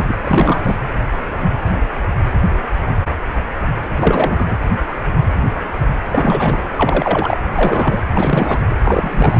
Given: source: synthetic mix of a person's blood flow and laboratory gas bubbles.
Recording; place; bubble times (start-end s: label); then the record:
Doppler ultrasound of blood flow; precordium
0.00-0.03 s: bubbles
0.08-0.15 s: bubbles
0.23-0.78 s: bubbles
3.96-4.55 s: bubbles
6.12-6.58 s: bubbles
6.76-7.40 s: bubbles
7.52-8.00 s: bubbles
8.15-8.61 s: bubbles
8.75-9.40 s: bubbles
From the record:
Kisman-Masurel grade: 333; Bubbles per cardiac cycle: rolling drumbeat, 9 or more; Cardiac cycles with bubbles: 50 to 99%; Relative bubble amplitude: loud (0.450 to 0.775); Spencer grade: 3 (all of the cardiac periods contain showers or single bubble signals, but not dominating or overriding the cardiac motion signals); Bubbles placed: anywhere in the cardiac cycle